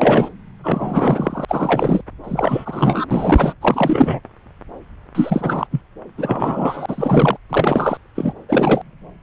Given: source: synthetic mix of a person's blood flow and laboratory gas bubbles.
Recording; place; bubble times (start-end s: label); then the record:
Doppler ultrasound of blood flow; subclavian vein
0.00-0.28 s: bubbles
0.64-1.45 s: bubbles
1.48-2.01 s: bubbles
2.23-3.06 s: bubbles
3.10-3.54 s: bubbles
3.61-4.20 s: bubbles
5.15-5.67 s: bubbles
5.71-5.80 s: bubbles
6.17-7.37 s: bubbles
7.50-7.97 s: bubbles
8.15-8.32 s: bubbles
8.48-8.81 s: bubbles
From the record:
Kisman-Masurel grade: 333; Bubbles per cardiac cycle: rolling drumbeat, 9 or more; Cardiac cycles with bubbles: 50 to 99%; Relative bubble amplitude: loud (0.450 to 0.775); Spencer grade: 3 (all of the cardiac periods contain showers or single bubble signals, but not dominating or overriding the cardiac motion signals); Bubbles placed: anywhere in the cardiac cycle